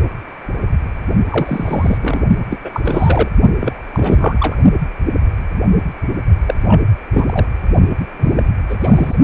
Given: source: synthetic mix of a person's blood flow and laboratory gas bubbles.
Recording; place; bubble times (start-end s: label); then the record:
Doppler ultrasound of blood flow; precordium
1.30-1.98 s: bubbles
2.01-2.21 s: bubbles
2.50-2.58 s: bubbles
2.65-2.81 s: bubbles
2.83-3.28 s: bubbles
3.59-3.73 s: bubbles
3.93-4.55 s: bubbles
6.46-6.54 s: bubbles
6.67-6.82 s: bubbles
7.13-7.46 s: bubbles
8.19-8.43 s: bubbles
8.69-8.76 s: bubbles
8.80-9.15 s: bubbles
From the record:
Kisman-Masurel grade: 233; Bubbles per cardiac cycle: several, 3 to 8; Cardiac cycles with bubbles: 50 to 99%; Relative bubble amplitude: loud (0.450 to 0.775); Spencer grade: 3 (all of the cardiac periods contain showers or single bubble signals, but not dominating or overriding the cardiac motion signals); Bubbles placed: only in the low amplitude regions of the cardiac cycle